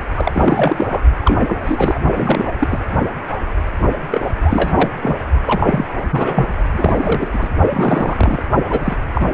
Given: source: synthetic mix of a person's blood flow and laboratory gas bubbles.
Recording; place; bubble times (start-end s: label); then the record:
Doppler ultrasound of blood flow; precordium
0.16-1.04 s: bubbles
1.21-1.40 s: bubbles
1.47-1.99 s: bubbles
2.15-2.48 s: bubbles
2.60-2.80 s: bubbles
4.10-4.32 s: bubbles
4.44-4.72 s: bubbles
4.75-4.90 s: bubbles
5.02-5.25 s: bubbles
5.46-6.05 s: bubbles
6.12-6.51 s: bubbles
6.73-6.93 s: bubbles
7.02-7.29 s: bubbles
7.33-7.49 s: bubbles
7.69-8.46 s: bubbles
8.69-8.80 s: bubbles
8.84-8.96 s: bubbles
9.14-9.26 s: bubbles
9.32-9.34 s: bubbles
From the record:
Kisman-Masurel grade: 333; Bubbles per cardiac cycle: rolling drumbeat, 9 or more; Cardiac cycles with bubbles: 50 to 99%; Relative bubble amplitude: loud (0.450 to 0.775); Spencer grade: 3 (all of the cardiac periods contain showers or single bubble signals, but not dominating or overriding the cardiac motion signals); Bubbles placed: only in the low amplitude regions of the cardiac cycle